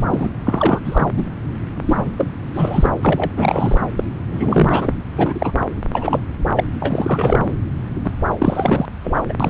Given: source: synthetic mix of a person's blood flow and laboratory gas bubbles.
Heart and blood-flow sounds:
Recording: Doppler ultrasound of blood flow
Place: subclavian vein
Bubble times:
0.00-0.03 s: bubbles
0.09-0.30 s: bubbles
0.44-0.81 s: bubbles
0.84-1.11 s: bubbles
1.16-1.26 s: bubbles
1.86-2.13 s: bubbles
2.18-2.33 s: bubbles
2.54-2.90 s: bubbles
3.02-3.31 s: bubbles
3.35-3.81 s: bubbles
3.96-4.04 s: bubbles
4.32-4.93 s: bubbles
5.11-5.58 s: bubbles
5.92-6.21 s: bubbles
6.55-6.64 s: bubbles
6.82-7.55 s: bubbles
8.04-8.12 s: bubbles
8.38-8.86 s: bubbles
9.04-9.21 s: bubbles
9.29-9.34 s: bubbles
9.39-9.50 s: bubbles
From the record:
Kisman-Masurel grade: 343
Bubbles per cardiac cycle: rolling drumbeat, 9 or more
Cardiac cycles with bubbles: 100%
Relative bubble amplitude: loud (0.450 to 0.775)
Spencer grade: 3 (all of the cardiac periods contain showers or single bubble signals, but not dominating or overriding the cardiac motion signals)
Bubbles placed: anywhere in the cardiac cycle

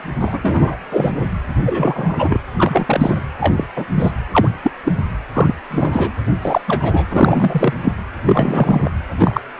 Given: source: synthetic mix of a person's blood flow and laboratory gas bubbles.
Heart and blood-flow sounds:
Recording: Doppler ultrasound of blood flow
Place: precordium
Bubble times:
0.20-0.40 s: bubbles
0.43-0.78 s: bubbles
0.91-1.11 s: bubbles
1.66-2.40 s: bubbles
2.56-3.21 s: bubbles
3.40-3.65 s: bubbles
3.76-3.85 s: bubbles
3.94-4.12 s: bubbles
4.31-4.48 s: bubbles
4.62-4.71 s: bubbles
4.84-4.92 s: bubbles
5.34-5.55 s: bubbles
5.71-6.12 s: bubbles
6.42-6.61 s: bubbles
6.67-7.06 s: bubbles
7.10-7.73 s: bubbles
7.83-7.92 s: bubbles
8.26-8.91 s: bubbles
9.18-9.41 s: bubbles
From the record:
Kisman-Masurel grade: 243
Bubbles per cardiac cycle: several, 3 to 8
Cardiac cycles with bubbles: 100%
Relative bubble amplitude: loud (0.450 to 0.775)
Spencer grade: 3 (all of the cardiac periods contain showers or single bubble signals, but not dominating or overriding the cardiac motion signals)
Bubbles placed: anywhere in the cardiac cycle

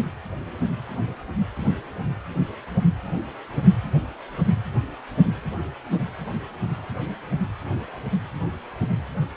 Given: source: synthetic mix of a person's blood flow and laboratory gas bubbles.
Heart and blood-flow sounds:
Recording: Doppler ultrasound of blood flow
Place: precordium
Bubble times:
no bubbles
From the record:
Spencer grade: 0 (complete lack of bubble signals)

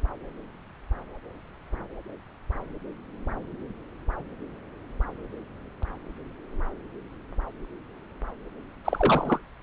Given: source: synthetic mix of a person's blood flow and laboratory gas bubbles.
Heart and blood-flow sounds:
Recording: Doppler ultrasound of blood flow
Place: subclavian vein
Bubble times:
8.85-9.39 s: bubbles
From the record:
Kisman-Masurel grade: 212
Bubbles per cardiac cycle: several, 3 to 8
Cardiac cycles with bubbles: 1 to 10%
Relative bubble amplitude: moderate (0.250 to 0.450)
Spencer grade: 1 (occasional bubble signal discernible with the cardiac motion signal, with majority of cardiac periods free of bubbles)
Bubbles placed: anywhere in the cardiac cycle

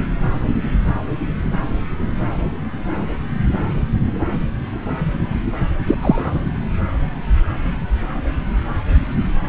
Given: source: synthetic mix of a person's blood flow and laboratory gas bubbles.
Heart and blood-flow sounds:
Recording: Doppler ultrasound of blood flow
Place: subclavian vein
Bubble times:
5.87-5.95 s: bubbles
6.00-6.40 s: bubbles
From the record:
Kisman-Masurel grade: 113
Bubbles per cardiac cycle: 1 to 2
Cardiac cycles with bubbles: 1 to 10%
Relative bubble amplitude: loud (0.450 to 0.775)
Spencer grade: 1 (occasional bubble signal discernible with the cardiac motion signal, with majority of cardiac periods free of bubbles)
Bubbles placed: anywhere in the cardiac cycle

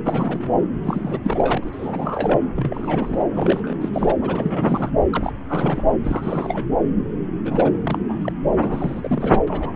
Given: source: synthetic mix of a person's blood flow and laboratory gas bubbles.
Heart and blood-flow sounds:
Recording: Doppler ultrasound of blood flow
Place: subclavian vein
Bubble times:
0.04-0.54 s: bubbles
0.84-1.20 s: bubbles
1.23-2.40 s: bubbles
2.56-3.23 s: bubbles
3.35-3.75 s: bubbles
3.81-3.89 s: bubbles
3.93-4.15 s: bubbles
4.21-4.91 s: bubbles
5.12-5.33 s: bubbles
5.48-5.84 s: bubbles
6.04-6.65 s: bubbles
7.45-7.80 s: bubbles
7.82-7.98 s: bubbles
8.09-8.33 s: bubbles
8.52-9.42 s: bubbles
9.47-9.76 s: bubbles
From the record:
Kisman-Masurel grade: 342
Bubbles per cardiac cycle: rolling drumbeat, 9 or more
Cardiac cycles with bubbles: 100%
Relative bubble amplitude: moderate (0.250 to 0.450)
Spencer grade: 3 (all of the cardiac periods contain showers or single bubble signals, but not dominating or overriding the cardiac motion signals)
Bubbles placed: anywhere in the cardiac cycle

